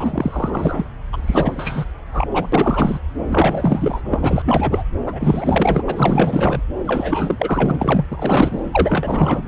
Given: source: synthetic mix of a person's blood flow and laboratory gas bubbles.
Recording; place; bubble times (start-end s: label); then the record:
Doppler ultrasound of blood flow; subclavian vein
0.00-0.86 s: bubbles
1.12-1.84 s: bubbles
2.12-2.27 s: bubbles
2.33-2.48 s: bubbles
2.52-2.99 s: bubbles
3.28-4.02 s: bubbles
4.04-4.83 s: bubbles
5.05-5.83 s: bubbles
5.87-6.62 s: bubbles
6.87-7.36 s: bubbles
7.39-8.05 s: bubbles
8.12-9.43 s: bubbles
From the record:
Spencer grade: 4 (maximum detectable bubble signal sounding continuously throughout systole and diastole of every cardiac period, and overriding the amplitude of the normal cardiac signals); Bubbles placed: anywhere in the cardiac cycle